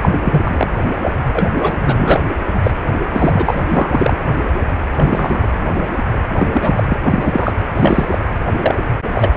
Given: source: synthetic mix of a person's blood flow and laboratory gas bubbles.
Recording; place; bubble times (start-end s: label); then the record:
Doppler ultrasound of blood flow; precordium
0.01-0.19 s: bubbles
0.23-0.70 s: bubbles
1.02-1.15 s: bubbles
1.33-1.49 s: bubbles
1.60-1.72 s: bubbles
1.79-2.20 s: bubbles
2.63-2.71 s: bubbles
2.93-3.02 s: bubbles
3.10-3.64 s: bubbles
3.71-4.16 s: bubbles
4.95-5.38 s: bubbles
6.38-6.47 s: bubbles
6.52-6.83 s: bubbles
6.88-6.97 s: bubbles
7.05-7.52 s: bubbles
7.78-8.18 s: bubbles
8.60-8.75 s: bubbles
9.12-9.30 s: bubbles
From the record:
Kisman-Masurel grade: 233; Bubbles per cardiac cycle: several, 3 to 8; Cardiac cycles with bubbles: 50 to 99%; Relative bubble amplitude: loud (0.450 to 0.775); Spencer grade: 3 (all of the cardiac periods contain showers or single bubble signals, but not dominating or overriding the cardiac motion signals); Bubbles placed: anywhere in the cardiac cycle